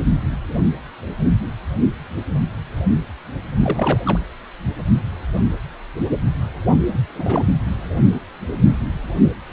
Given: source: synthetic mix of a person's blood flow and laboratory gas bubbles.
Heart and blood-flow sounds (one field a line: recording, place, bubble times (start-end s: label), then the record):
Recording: Doppler ultrasound of blood flow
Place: precordium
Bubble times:
3.60-4.00 s: bubbles
4.05-4.19 s: bubbles
6.92-7.02 s: bubbles
7.15-7.43 s: bubbles
From the record:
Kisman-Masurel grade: 211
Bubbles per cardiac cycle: several, 3 to 8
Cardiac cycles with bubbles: 1 to 10%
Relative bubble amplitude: barely perceptible (0.100 to 0.250)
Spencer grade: 1 (occasional bubble signal discernible with the cardiac motion signal, with majority of cardiac periods free of bubbles)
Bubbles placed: anywhere in the cardiac cycle